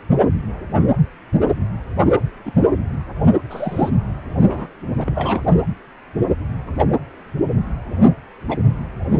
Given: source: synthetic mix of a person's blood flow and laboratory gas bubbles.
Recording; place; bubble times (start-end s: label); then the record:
Doppler ultrasound of blood flow; precordium
2.46-2.52 s: bubbles
3.50-3.90 s: bubbles
4.42-4.67 s: bubbles
4.97-5.40 s: bubbles
6.78-6.83 s: bubbles
8.49-8.58 s: bubbles
From the record:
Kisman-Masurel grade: 122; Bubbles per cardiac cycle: 1 to 2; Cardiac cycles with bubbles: 10 to 50%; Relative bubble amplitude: moderate (0.250 to 0.450); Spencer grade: 2 (many but less than half of the cardiac periods contain bubble signals, singularly or in groups); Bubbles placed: anywhere in the cardiac cycle